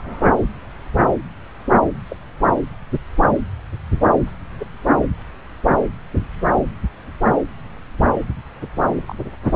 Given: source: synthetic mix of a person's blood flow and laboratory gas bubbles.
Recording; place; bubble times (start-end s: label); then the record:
Doppler ultrasound of blood flow; subclavian vein
0.00-0.29 s: bubbles
2.10-2.17 s: bubbles
4.59-4.66 s: bubbles
9.08-9.15 s: bubbles
9.47-9.56 s: bubbles
From the record:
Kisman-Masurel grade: 121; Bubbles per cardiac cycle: 1 to 2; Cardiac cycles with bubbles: 10 to 50%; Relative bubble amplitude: barely perceptible (0.100 to 0.250); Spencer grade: 2 (many but less than half of the cardiac periods contain bubble signals, singularly or in groups); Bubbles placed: anywhere in the cardiac cycle